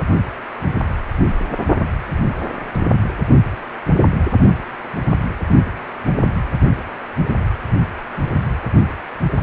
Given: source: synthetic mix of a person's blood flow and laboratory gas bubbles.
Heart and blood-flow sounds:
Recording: Doppler ultrasound of blood flow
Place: precordium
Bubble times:
no bubbles
From the record:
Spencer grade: 0 (complete lack of bubble signals)

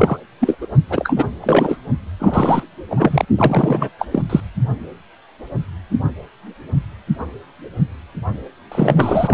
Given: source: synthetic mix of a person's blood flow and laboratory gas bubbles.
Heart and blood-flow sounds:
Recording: Doppler ultrasound of blood flow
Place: precordium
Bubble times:
0.00-0.18 s: bubbles
0.40-0.57 s: bubbles
0.61-0.67 s: bubbles
0.89-1.13 s: bubbles
1.16-1.26 s: bubbles
1.43-1.77 s: bubbles
2.19-2.64 s: bubbles
2.90-3.25 s: bubbles
3.37-3.90 s: bubbles
3.98-4.06 s: bubbles
4.11-4.22 s: bubbles
4.29-4.40 s: bubbles
8.71-9.34 s: bubbles
From the record:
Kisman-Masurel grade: 333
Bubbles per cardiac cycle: rolling drumbeat, 9 or more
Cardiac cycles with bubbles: 50 to 99%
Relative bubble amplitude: loud (0.450 to 0.775)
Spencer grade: 3 (all of the cardiac periods contain showers or single bubble signals, but not dominating or overriding the cardiac motion signals)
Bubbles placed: only in the low amplitude regions of the cardiac cycle

